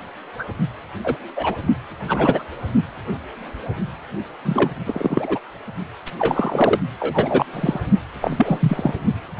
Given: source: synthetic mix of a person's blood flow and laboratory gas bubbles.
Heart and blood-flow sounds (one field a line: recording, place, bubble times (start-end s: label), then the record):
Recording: Doppler ultrasound of blood flow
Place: precordium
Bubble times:
0.39-0.45 s: bubbles
1.04-1.17 s: bubbles
1.35-1.57 s: bubbles
2.08-2.44 s: bubbles
4.45-4.71 s: bubbles
4.86-5.41 s: bubbles
6.05-6.11 s: bubbles
6.19-6.80 s: bubbles
7.00-7.46 s: bubbles
7.53-7.81 s: bubbles
8.21-8.92 s: bubbles
From the record:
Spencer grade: 3 (all of the cardiac periods contain showers or single bubble signals, but not dominating or overriding the cardiac motion signals)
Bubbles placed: only in the low amplitude regions of the cardiac cycle